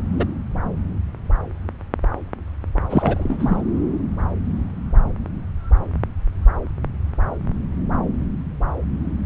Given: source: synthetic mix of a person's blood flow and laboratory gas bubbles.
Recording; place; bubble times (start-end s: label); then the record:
Doppler ultrasound of blood flow; subclavian vein
0.15-0.25 s: bubbles
2.90-3.61 s: bubbles
From the record:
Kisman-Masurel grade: 222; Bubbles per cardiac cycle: several, 3 to 8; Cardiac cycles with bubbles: 10 to 50%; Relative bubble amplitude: moderate (0.250 to 0.450); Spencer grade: 2 (many but less than half of the cardiac periods contain bubble signals, singularly or in groups); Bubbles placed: anywhere in the cardiac cycle